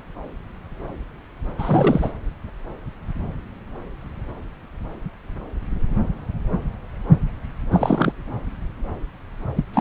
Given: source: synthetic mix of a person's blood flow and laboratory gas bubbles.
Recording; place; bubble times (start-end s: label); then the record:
Doppler ultrasound of blood flow; subclavian vein
1.59-2.12 s: bubbles
7.71-8.12 s: bubbles
9.55-9.64 s: bubbles
9.73-9.81 s: bubbles
From the record:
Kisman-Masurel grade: 222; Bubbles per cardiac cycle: several, 3 to 8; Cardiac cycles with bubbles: 10 to 50%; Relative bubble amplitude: moderate (0.250 to 0.450); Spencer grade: 2 (many but less than half of the cardiac periods contain bubble signals, singularly or in groups); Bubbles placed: anywhere in the cardiac cycle